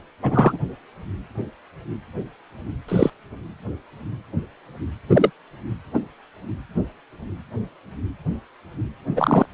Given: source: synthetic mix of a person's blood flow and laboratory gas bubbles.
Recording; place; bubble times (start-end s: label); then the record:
Doppler ultrasound of blood flow; precordium
0.22-0.58 s: bubbles
2.88-3.10 s: bubbles
5.10-5.31 s: bubbles
5.94-5.99 s: bubbles
9.16-9.46 s: bubbles
From the record:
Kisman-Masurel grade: 123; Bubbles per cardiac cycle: 1 to 2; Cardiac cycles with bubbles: 10 to 50%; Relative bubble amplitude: loud (0.450 to 0.775); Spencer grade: 2 (many but less than half of the cardiac periods contain bubble signals, singularly or in groups); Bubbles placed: anywhere in the cardiac cycle